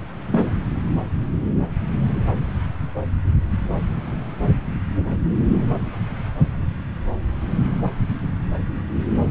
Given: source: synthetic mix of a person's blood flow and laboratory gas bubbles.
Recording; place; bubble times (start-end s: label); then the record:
Doppler ultrasound of blood flow; subclavian vein
0.32-0.53 s: bubbles
From the record:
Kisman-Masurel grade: 112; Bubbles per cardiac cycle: 1 to 2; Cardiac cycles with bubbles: 1 to 10%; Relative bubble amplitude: moderate (0.250 to 0.450); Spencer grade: 1 (occasional bubble signal discernible with the cardiac motion signal, with majority of cardiac periods free of bubbles); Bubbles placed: anywhere in the cardiac cycle